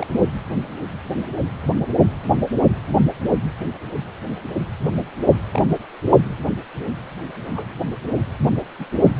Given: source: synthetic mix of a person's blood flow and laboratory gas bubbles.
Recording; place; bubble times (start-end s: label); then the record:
Doppler ultrasound of blood flow; precordium
0.00-0.07 s: bubbles
5.53-5.62 s: bubbles
7.55-7.74 s: bubbles
8.78-8.86 s: bubbles
From the record:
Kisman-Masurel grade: 121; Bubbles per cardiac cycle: 1 to 2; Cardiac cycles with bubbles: 10 to 50%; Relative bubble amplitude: barely perceptible (0.100 to 0.250); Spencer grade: 2 (many but less than half of the cardiac periods contain bubble signals, singularly or in groups); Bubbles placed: only in the low amplitude regions of the cardiac cycle